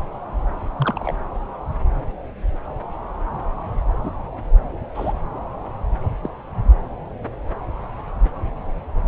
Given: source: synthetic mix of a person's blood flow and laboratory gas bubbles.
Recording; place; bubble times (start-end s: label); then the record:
Doppler ultrasound of blood flow; subclavian vein
0.78-1.14 s: bubbles
4.04-4.12 s: bubbles
4.94-5.13 s: bubbles
6.22-6.29 s: bubbles
From the record:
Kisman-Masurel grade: 122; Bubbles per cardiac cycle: 1 to 2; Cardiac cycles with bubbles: 10 to 50%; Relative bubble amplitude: moderate (0.250 to 0.450); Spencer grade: 2 (many but less than half of the cardiac periods contain bubble signals, singularly or in groups); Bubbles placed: anywhere in the cardiac cycle